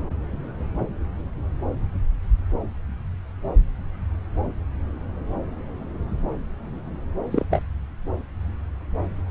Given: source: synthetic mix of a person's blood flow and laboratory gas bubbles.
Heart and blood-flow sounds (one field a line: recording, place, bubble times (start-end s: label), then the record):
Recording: Doppler ultrasound of blood flow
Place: subclavian vein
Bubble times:
7.30-7.45 s: bubbles
7.50-7.63 s: bubbles
From the record:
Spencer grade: 1 (occasional bubble signal discernible with the cardiac motion signal, with majority of cardiac periods free of bubbles)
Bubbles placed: anywhere in the cardiac cycle